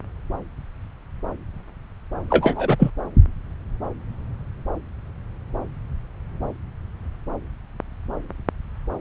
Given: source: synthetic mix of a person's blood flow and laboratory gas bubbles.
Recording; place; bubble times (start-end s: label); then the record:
Doppler ultrasound of blood flow; subclavian vein
2.30-2.77 s: bubbles
2.79-2.90 s: bubbles
From the record:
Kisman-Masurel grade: 213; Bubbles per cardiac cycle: several, 3 to 8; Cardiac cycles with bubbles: 1 to 10%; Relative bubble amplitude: loud (0.450 to 0.775); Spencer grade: 1 (occasional bubble signal discernible with the cardiac motion signal, with majority of cardiac periods free of bubbles); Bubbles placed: anywhere in the cardiac cycle